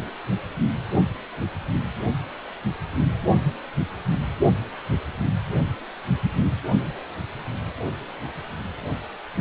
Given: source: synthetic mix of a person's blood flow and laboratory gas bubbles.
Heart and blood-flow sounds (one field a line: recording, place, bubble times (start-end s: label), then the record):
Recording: Doppler ultrasound of blood flow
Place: precordium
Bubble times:
no bubbles
From the record:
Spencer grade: 0 (complete lack of bubble signals)